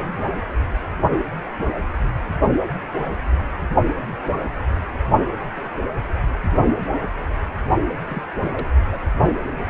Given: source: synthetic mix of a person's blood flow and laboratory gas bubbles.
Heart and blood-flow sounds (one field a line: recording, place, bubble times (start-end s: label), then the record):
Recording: Doppler ultrasound of blood flow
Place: precordium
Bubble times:
8.04-8.22 s: bubbles
8.43-8.70 s: bubbles
8.92-9.00 s: bubbles
From the record:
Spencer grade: 1 (occasional bubble signal discernible with the cardiac motion signal, with majority of cardiac periods free of bubbles)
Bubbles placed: only in the low amplitude regions of the cardiac cycle